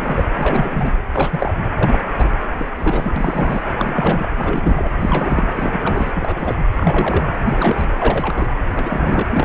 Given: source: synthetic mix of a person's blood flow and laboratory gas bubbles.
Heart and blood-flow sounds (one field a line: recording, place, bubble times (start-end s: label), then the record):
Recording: Doppler ultrasound of blood flow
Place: precordium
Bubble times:
0.00-0.25 s: bubbles
0.36-0.95 s: bubbles
1.13-1.54 s: bubbles
1.76-1.99 s: bubbles
2.18-2.38 s: bubbles
2.52-2.67 s: bubbles
2.75-3.62 s: bubbles
3.77-4.28 s: bubbles
4.38-4.91 s: bubbles
5.00-5.49 s: bubbles
5.57-6.12 s: bubbles
6.15-6.55 s: bubbles
6.77-7.25 s: bubbles
7.47-7.86 s: bubbles
7.98-8.48 s: bubbles
8.71-9.23 s: bubbles
9.33-9.45 s: bubbles
From the record:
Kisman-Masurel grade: 342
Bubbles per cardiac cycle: rolling drumbeat, 9 or more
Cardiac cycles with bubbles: 100%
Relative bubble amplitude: moderate (0.250 to 0.450)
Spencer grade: 3 (all of the cardiac periods contain showers or single bubble signals, but not dominating or overriding the cardiac motion signals)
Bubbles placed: anywhere in the cardiac cycle